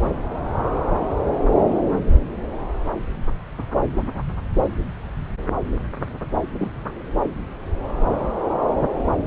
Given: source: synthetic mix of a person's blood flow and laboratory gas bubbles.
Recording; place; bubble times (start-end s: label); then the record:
Doppler ultrasound of blood flow; subclavian vein
6.60-6.70 s: bubbles
From the record:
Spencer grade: 1 (occasional bubble signal discernible with the cardiac motion signal, with majority of cardiac periods free of bubbles); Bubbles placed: anywhere in the cardiac cycle